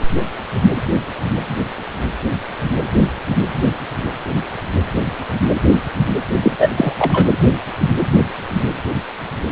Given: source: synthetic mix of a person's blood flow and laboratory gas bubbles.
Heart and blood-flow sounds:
Doppler ultrasound of blood flow; precordium
6.42-6.51 s: bubbles
6.58-6.70 s: bubbles
6.76-6.93 s: bubbles
6.99-7.27 s: bubbles
From the record:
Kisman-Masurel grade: 213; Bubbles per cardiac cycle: several, 3 to 8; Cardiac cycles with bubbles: 1 to 10%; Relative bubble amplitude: loud (0.450 to 0.775); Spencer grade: 1 (occasional bubble signal discernible with the cardiac motion signal, with majority of cardiac periods free of bubbles); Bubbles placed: anywhere in the cardiac cycle

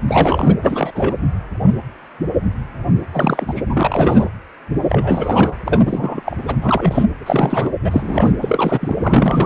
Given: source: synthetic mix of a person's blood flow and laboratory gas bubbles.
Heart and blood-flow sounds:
Doppler ultrasound of blood flow; precordium
0.08-0.55 s: bubbles
0.62-0.91 s: bubbles
0.94-1.15 s: bubbles
3.13-3.62 s: bubbles
3.69-4.26 s: bubbles
4.89-5.55 s: bubbles
5.66-6.22 s: bubbles
6.25-6.37 s: bubbles
6.46-6.56 s: bubbles
6.61-7.04 s: bubbles
7.26-7.71 s: bubbles
7.83-8.33 s: bubbles
8.41-8.96 s: bubbles
9.02-9.46 s: bubbles
From the record:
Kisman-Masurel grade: 333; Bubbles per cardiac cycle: rolling drumbeat, 9 or more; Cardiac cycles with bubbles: 50 to 99%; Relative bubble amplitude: loud (0.450 to 0.775); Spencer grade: 3 (all of the cardiac periods contain showers or single bubble signals, but not dominating or overriding the cardiac motion signals); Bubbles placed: anywhere in the cardiac cycle

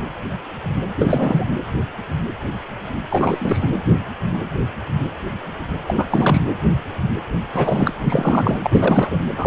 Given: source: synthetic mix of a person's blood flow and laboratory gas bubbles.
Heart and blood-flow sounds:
Doppler ultrasound of blood flow; precordium
0.98-1.45 s: bubbles
3.10-3.73 s: bubbles
5.87-6.05 s: bubbles
6.10-6.41 s: bubbles
7.54-7.93 s: bubbles
8.04-8.57 s: bubbles
8.62-9.19 s: bubbles
9.36-9.47 s: bubbles
From the record:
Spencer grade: 3 (all of the cardiac periods contain showers or single bubble signals, but not dominating or overriding the cardiac motion signals); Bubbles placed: anywhere in the cardiac cycle

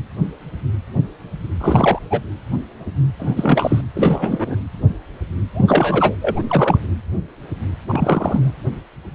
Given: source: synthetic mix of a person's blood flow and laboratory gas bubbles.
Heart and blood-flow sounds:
Doppler ultrasound of blood flow; precordium
1.60-1.99 s: bubbles
2.10-2.21 s: bubbles
3.19-3.81 s: bubbles
3.95-4.56 s: bubbles
5.54-6.15 s: bubbles
6.21-6.42 s: bubbles
6.49-6.79 s: bubbles
7.88-8.51 s: bubbles
From the record:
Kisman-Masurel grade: 333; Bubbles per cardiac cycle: rolling drumbeat, 9 or more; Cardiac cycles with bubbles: 50 to 99%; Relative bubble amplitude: loud (0.450 to 0.775); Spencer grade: 3 (all of the cardiac periods contain showers or single bubble signals, but not dominating or overriding the cardiac motion signals); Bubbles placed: anywhere in the cardiac cycle

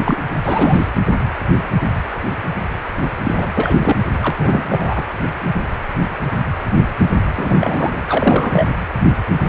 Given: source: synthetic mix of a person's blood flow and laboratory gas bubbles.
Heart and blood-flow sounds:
Doppler ultrasound of blood flow; precordium
0.00-0.17 s: bubbles
0.44-0.88 s: bubbles
3.24-3.52 s: bubbles
3.55-3.96 s: bubbles
4.21-5.06 s: bubbles
7.36-8.02 s: bubbles
8.08-8.69 s: bubbles
From the record:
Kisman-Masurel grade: 332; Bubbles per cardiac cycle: rolling drumbeat, 9 or more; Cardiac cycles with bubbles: 50 to 99%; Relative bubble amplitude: moderate (0.250 to 0.450); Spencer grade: 3 (all of the cardiac periods contain showers or single bubble signals, but not dominating or overriding the cardiac motion signals); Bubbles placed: anywhere in the cardiac cycle

